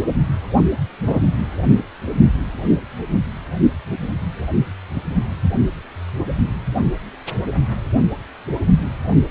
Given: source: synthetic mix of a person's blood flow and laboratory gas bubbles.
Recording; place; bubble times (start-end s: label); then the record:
Doppler ultrasound of blood flow; precordium
1.07-1.20 s: bubbles
From the record:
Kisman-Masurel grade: 113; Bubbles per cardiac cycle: 1 to 2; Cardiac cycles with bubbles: 1 to 10%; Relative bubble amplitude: loud (0.450 to 0.775); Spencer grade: 1 (occasional bubble signal discernible with the cardiac motion signal, with majority of cardiac periods free of bubbles); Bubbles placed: only in the low amplitude regions of the cardiac cycle